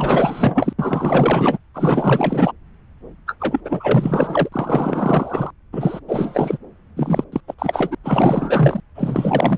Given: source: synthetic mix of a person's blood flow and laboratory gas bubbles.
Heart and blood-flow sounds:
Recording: Doppler ultrasound of blood flow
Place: subclavian vein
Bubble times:
0.00-0.73 s: bubbles
0.79-1.58 s: bubbles
1.74-2.52 s: bubbles
3.27-3.36 s: bubbles
3.40-3.60 s: bubbles
3.65-4.49 s: bubbles
4.52-5.50 s: bubbles
5.72-6.00 s: bubbles
6.07-6.58 s: bubbles
6.96-7.24 s: bubbles
7.32-7.40 s: bubbles
7.47-7.54 s: bubbles
7.58-7.95 s: bubbles
8.04-8.80 s: bubbles
8.95-9.58 s: bubbles
From the record:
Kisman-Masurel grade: 444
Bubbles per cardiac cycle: continuous sound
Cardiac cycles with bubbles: 100%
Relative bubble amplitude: maximal (0.775 to 0.999)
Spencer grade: 4 (maximum detectable bubble signal sounding continuously throughout systole and diastole of every cardiac period, and overriding the amplitude of the normal cardiac signals)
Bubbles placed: anywhere in the cardiac cycle

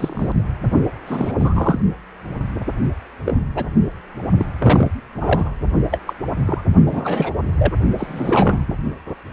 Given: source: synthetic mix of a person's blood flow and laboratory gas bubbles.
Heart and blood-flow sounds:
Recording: Doppler ultrasound of blood flow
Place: precordium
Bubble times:
0.00-0.32 s: bubbles
1.06-1.35 s: bubbles
1.39-1.80 s: bubbles
3.25-3.40 s: bubbles
3.54-3.66 s: bubbles
4.37-4.46 s: bubbles
4.58-4.92 s: bubbles
5.15-5.52 s: bubbles
5.91-5.99 s: bubbles
6.07-6.14 s: bubbles
6.46-6.61 s: bubbles
6.86-7.32 s: bubbles
7.58-7.73 s: bubbles
7.98-8.65 s: bubbles
From the record:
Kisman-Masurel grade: 233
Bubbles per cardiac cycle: several, 3 to 8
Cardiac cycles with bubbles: 50 to 99%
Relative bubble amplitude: loud (0.450 to 0.775)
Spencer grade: 3 (all of the cardiac periods contain showers or single bubble signals, but not dominating or overriding the cardiac motion signals)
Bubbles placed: only in the low amplitude regions of the cardiac cycle

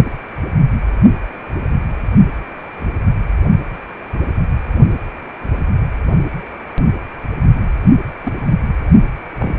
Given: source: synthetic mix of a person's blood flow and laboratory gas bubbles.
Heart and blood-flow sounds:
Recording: Doppler ultrasound of blood flow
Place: precordium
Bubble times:
8.23-8.33 s: bubbles
9.38-9.59 s: bubbles
From the record:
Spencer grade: 2 (many but less than half of the cardiac periods contain bubble signals, singularly or in groups)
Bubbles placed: only in the low amplitude regions of the cardiac cycle

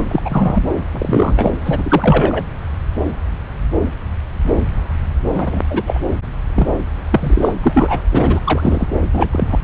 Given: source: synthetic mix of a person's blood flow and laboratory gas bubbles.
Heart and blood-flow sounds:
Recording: Doppler ultrasound of blood flow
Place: subclavian vein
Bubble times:
0.00-0.22 s: bubbles
0.24-0.66 s: bubbles
0.91-1.51 s: bubbles
1.65-2.43 s: bubbles
5.34-5.62 s: bubbles
5.68-6.01 s: bubbles
6.55-6.67 s: bubbles
7.10-7.55 s: bubbles
7.63-8.02 s: bubbles
8.11-8.40 s: bubbles
8.44-8.87 s: bubbles
9.12-9.28 s: bubbles
9.32-9.59 s: bubbles
From the record:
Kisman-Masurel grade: 233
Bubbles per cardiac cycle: several, 3 to 8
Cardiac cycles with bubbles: 50 to 99%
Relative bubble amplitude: loud (0.450 to 0.775)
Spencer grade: 3 (all of the cardiac periods contain showers or single bubble signals, but not dominating or overriding the cardiac motion signals)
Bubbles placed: anywhere in the cardiac cycle

